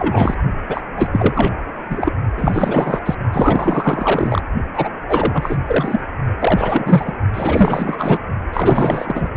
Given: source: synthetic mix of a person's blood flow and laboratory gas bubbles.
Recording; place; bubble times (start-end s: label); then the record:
Doppler ultrasound of blood flow; precordium
0.00-0.35 s: bubbles
0.68-0.83 s: bubbles
0.96-1.08 s: bubbles
1.12-1.51 s: bubbles
1.89-2.11 s: bubbles
2.37-3.00 s: bubbles
3.05-3.15 s: bubbles
3.32-4.42 s: bubbles
4.73-4.89 s: bubbles
5.08-5.57 s: bubbles
5.67-6.00 s: bubbles
6.39-7.12 s: bubbles
7.33-8.19 s: bubbles
8.53-9.29 s: bubbles
From the record:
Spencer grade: 4 (maximum detectable bubble signal sounding continuously throughout systole and diastole of every cardiac period, and overriding the amplitude of the normal cardiac signals); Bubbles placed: only in the low amplitude regions of the cardiac cycle